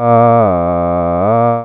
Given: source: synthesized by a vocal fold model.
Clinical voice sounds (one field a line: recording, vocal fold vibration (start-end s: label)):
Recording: sustained vowel that changes in the middle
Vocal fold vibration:
0.00-0.36 s: 117.2 Hz, open quotient 0.49
0.56-1.16 s: 86.9 Hz, open quotient 0.33
1.36-1.65 s: 117.2 Hz, open quotient 0.49